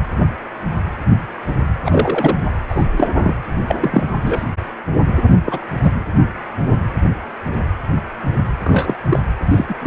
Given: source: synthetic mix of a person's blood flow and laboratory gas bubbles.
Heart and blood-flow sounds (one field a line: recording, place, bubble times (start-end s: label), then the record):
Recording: Doppler ultrasound of blood flow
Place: precordium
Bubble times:
1.84-2.37 s: bubbles
2.68-2.89 s: bubbles
2.97-3.08 s: bubbles
3.18-3.35 s: bubbles
3.67-3.76 s: bubbles
3.81-4.07 s: bubbles
4.22-4.45 s: bubbles
5.45-5.59 s: bubbles
5.83-5.92 s: bubbles
8.64-8.96 s: bubbles
9.09-9.19 s: bubbles
9.50-9.87 s: bubbles
From the record:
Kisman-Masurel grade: 233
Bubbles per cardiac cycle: several, 3 to 8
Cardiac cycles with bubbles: 50 to 99%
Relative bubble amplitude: loud (0.450 to 0.775)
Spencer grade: 3 (all of the cardiac periods contain showers or single bubble signals, but not dominating or overriding the cardiac motion signals)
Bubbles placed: anywhere in the cardiac cycle